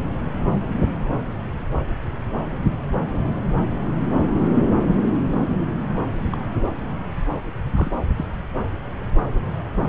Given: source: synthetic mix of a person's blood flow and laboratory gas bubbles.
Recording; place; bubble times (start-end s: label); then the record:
Doppler ultrasound of blood flow; subclavian vein
6.33-6.37 s: bubbles
6.58-6.62 s: bubbles
7.75-7.91 s: bubbles
8.16-8.27 s: bubbles
From the record:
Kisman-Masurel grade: 121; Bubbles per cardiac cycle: 1 to 2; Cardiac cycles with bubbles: 10 to 50%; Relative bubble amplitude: barely perceptible (0.100 to 0.250); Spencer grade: 2 (many but less than half of the cardiac periods contain bubble signals, singularly or in groups); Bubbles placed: anywhere in the cardiac cycle